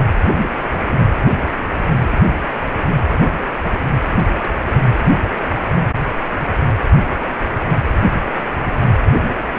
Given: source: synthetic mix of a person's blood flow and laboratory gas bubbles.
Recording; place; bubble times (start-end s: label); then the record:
Doppler ultrasound of blood flow; precordium
4.17-4.28 s: bubbles
4.30-4.67 s: bubbles
From the record:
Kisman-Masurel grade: 211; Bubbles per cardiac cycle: several, 3 to 8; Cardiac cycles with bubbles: 1 to 10%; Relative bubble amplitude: barely perceptible (0.100 to 0.250); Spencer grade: 1 (occasional bubble signal discernible with the cardiac motion signal, with majority of cardiac periods free of bubbles); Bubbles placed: anywhere in the cardiac cycle